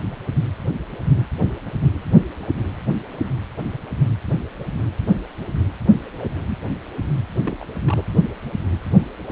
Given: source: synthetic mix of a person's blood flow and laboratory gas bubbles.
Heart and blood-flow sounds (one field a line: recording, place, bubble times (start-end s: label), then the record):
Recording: Doppler ultrasound of blood flow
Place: precordium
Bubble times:
7.44-7.57 s: bubbles
7.61-7.65 s: bubbles
7.85-8.04 s: bubbles
From the record:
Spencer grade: 2 (many but less than half of the cardiac periods contain bubble signals, singularly or in groups)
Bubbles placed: anywhere in the cardiac cycle